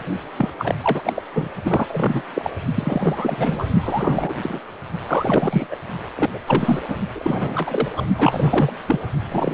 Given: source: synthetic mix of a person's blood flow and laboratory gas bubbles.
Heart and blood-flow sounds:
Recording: Doppler ultrasound of blood flow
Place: precordium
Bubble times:
0.00-0.04 s: bubbles
0.37-0.50 s: bubbles
0.59-0.75 s: bubbles
0.82-1.13 s: bubbles
1.16-1.23 s: bubbles
1.32-1.48 s: bubbles
1.62-2.22 s: bubbles
2.34-2.50 s: bubbles
2.75-3.66 s: bubbles
3.83-4.34 s: bubbles
4.42-4.60 s: bubbles
5.00-5.67 s: bubbles
5.71-5.75 s: bubbles
6.16-6.30 s: bubbles
6.33-6.39 s: bubbles
6.46-6.80 s: bubbles
6.88-6.96 s: bubbles
7.15-7.88 s: bubbles
7.96-8.05 s: bubbles
8.18-8.72 s: bubbles
8.86-8.99 s: bubbles
9.30-9.52 s: bubbles
From the record:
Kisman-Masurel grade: 342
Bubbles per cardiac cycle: rolling drumbeat, 9 or more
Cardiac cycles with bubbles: 100%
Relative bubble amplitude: moderate (0.250 to 0.450)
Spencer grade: 3 (all of the cardiac periods contain showers or single bubble signals, but not dominating or overriding the cardiac motion signals)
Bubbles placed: only in the low amplitude regions of the cardiac cycle

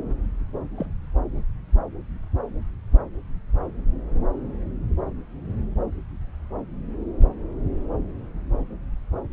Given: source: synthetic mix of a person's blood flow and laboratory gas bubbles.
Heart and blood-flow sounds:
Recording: Doppler ultrasound of blood flow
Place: subclavian vein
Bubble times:
0.77-0.90 s: bubbles
From the record:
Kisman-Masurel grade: 121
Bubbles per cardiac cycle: 1 to 2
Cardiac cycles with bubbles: 10 to 50%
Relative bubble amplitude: barely perceptible (0.100 to 0.250)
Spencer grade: 2 (many but less than half of the cardiac periods contain bubble signals, singularly or in groups)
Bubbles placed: anywhere in the cardiac cycle

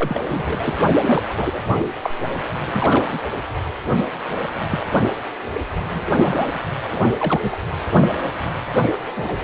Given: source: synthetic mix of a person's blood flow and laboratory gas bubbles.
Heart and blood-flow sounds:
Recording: Doppler ultrasound of blood flow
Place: precordium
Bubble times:
0.00-0.20 s: bubbles
0.28-0.80 s: bubbles
0.87-0.93 s: bubbles
1.05-1.22 s: bubbles
1.29-1.33 s: bubbles
1.37-1.61 s: bubbles
1.78-1.86 s: bubbles
2.02-2.10 s: bubbles
2.66-3.19 s: bubbles
4.71-4.79 s: bubbles
4.86-4.99 s: bubbles
5.89-6.01 s: bubbles
6.14-6.61 s: bubbles
6.92-7.13 s: bubbles
7.17-7.56 s: bubbles
8.80-8.99 s: bubbles
9.16-9.36 s: bubbles
From the record:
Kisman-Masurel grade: 232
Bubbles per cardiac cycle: several, 3 to 8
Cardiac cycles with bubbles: 50 to 99%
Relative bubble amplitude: moderate (0.250 to 0.450)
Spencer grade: 3 (all of the cardiac periods contain showers or single bubble signals, but not dominating or overriding the cardiac motion signals)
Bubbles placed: anywhere in the cardiac cycle

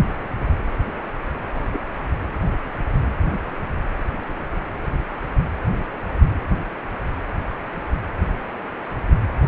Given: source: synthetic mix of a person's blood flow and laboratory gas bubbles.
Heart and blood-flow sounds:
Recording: Doppler ultrasound of blood flow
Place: precordium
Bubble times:
1.54-1.65 s: bubbles
1.70-1.85 s: bubbles
From the record:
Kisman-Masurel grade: 111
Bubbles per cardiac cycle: 1 to 2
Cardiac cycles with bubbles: 1 to 10%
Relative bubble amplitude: barely perceptible (0.100 to 0.250)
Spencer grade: 1 (occasional bubble signal discernible with the cardiac motion signal, with majority of cardiac periods free of bubbles)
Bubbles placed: anywhere in the cardiac cycle

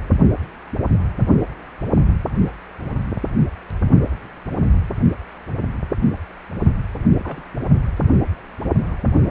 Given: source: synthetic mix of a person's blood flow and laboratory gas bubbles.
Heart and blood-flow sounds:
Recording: Doppler ultrasound of blood flow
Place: precordium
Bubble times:
7.16-7.42 s: bubbles
From the record:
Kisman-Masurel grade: 121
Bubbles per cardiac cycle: 1 to 2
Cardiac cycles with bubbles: 10 to 50%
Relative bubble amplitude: barely perceptible (0.100 to 0.250)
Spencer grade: 2 (many but less than half of the cardiac periods contain bubble signals, singularly or in groups)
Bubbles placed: only in the low amplitude regions of the cardiac cycle

